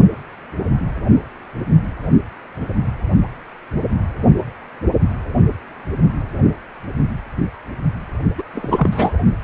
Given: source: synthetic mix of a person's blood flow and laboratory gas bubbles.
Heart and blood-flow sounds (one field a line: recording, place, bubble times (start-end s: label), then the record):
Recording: Doppler ultrasound of blood flow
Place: precordium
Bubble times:
8.38-8.42 s: bubbles
8.54-9.12 s: bubbles
From the record:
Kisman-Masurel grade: 223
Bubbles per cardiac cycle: several, 3 to 8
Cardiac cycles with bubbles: 10 to 50%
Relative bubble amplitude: loud (0.450 to 0.775)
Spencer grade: 2 (many but less than half of the cardiac periods contain bubble signals, singularly or in groups)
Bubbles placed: only in the low amplitude regions of the cardiac cycle